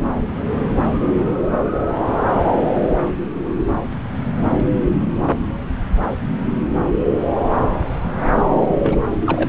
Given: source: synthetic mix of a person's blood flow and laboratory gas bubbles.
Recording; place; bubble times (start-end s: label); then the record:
Doppler ultrasound of blood flow; subclavian vein
8.82-9.02 s: bubbles
9.07-9.16 s: bubbles
9.26-9.49 s: bubbles
From the record:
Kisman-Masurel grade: 212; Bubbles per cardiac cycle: several, 3 to 8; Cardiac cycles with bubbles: 1 to 10%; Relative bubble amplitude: moderate (0.250 to 0.450); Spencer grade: 1 (occasional bubble signal discernible with the cardiac motion signal, with majority of cardiac periods free of bubbles); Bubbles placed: anywhere in the cardiac cycle